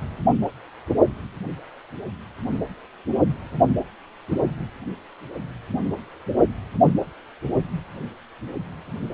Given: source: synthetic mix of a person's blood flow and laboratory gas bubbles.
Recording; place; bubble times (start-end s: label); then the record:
Doppler ultrasound of blood flow; precordium
4.31-4.37 s: bubbles
From the record:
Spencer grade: 1 (occasional bubble signal discernible with the cardiac motion signal, with majority of cardiac periods free of bubbles); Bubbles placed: only in the low amplitude regions of the cardiac cycle